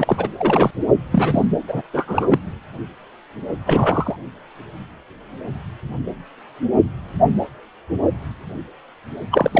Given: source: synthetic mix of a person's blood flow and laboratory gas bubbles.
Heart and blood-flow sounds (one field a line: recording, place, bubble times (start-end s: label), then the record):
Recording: Doppler ultrasound of blood flow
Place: precordium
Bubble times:
0.00-0.29 s: bubbles
0.38-0.70 s: bubbles
1.11-1.45 s: bubbles
1.68-1.82 s: bubbles
1.93-2.38 s: bubbles
3.66-4.17 s: bubbles
9.31-9.60 s: bubbles
From the record:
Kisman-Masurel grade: 223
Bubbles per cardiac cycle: several, 3 to 8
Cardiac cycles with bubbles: 10 to 50%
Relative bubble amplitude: loud (0.450 to 0.775)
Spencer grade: 2 (many but less than half of the cardiac periods contain bubble signals, singularly or in groups)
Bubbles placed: anywhere in the cardiac cycle